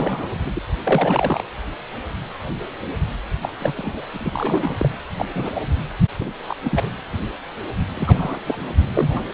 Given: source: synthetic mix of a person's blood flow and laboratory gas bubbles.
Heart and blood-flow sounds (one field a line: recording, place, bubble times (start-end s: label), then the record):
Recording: Doppler ultrasound of blood flow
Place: precordium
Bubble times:
0.00-0.28 s: bubbles
0.46-0.51 s: bubbles
0.53-0.59 s: bubbles
0.83-1.43 s: bubbles
3.42-3.72 s: bubbles
3.76-4.06 s: bubbles
4.13-4.31 s: bubbles
4.33-4.97 s: bubbles
5.17-5.25 s: bubbles
5.34-5.60 s: bubbles
6.20-6.31 s: bubbles
6.48-6.55 s: bubbles
6.63-6.93 s: bubbles
7.96-8.41 s: bubbles
8.45-8.56 s: bubbles
8.93-9.24 s: bubbles
From the record:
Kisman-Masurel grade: 232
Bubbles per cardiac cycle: several, 3 to 8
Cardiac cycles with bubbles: 50 to 99%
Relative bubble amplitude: moderate (0.250 to 0.450)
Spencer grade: 3 (all of the cardiac periods contain showers or single bubble signals, but not dominating or overriding the cardiac motion signals)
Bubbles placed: anywhere in the cardiac cycle